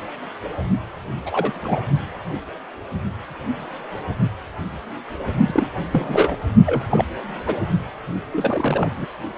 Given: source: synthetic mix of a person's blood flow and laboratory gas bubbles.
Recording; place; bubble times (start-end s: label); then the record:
Doppler ultrasound of blood flow; precordium
1.26-1.81 s: bubbles
5.47-5.67 s: bubbles
5.92-6.37 s: bubbles
6.66-6.83 s: bubbles
6.91-7.04 s: bubbles
7.46-7.58 s: bubbles
8.33-8.90 s: bubbles
8.96-9.05 s: bubbles
9.36-9.38 s: bubbles
From the record:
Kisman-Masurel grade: 232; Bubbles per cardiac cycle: several, 3 to 8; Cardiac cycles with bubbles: 50 to 99%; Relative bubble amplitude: moderate (0.250 to 0.450); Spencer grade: 3 (all of the cardiac periods contain showers or single bubble signals, but not dominating or overriding the cardiac motion signals); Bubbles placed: only in the low amplitude regions of the cardiac cycle